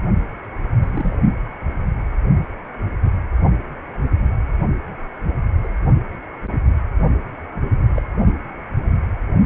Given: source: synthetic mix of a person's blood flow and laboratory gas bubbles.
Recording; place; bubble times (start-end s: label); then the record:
Doppler ultrasound of blood flow; precordium
0.81-1.18 s: bubbles
5.63-5.69 s: bubbles
7.91-8.02 s: bubbles
From the record:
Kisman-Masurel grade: 121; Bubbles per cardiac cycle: 1 to 2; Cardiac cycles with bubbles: 10 to 50%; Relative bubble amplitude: barely perceptible (0.100 to 0.250); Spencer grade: 2 (many but less than half of the cardiac periods contain bubble signals, singularly or in groups); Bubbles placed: only in the low amplitude regions of the cardiac cycle